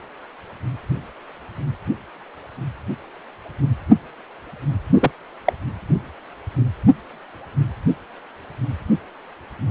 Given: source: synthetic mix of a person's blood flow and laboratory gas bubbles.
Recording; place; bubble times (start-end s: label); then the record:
Doppler ultrasound of blood flow; precordium
4.93-5.11 s: bubbles
5.46-5.53 s: bubbles
From the record:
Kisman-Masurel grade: 113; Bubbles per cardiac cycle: 1 to 2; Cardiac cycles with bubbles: 1 to 10%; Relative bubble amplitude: loud (0.450 to 0.775); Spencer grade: 1 (occasional bubble signal discernible with the cardiac motion signal, with majority of cardiac periods free of bubbles); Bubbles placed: anywhere in the cardiac cycle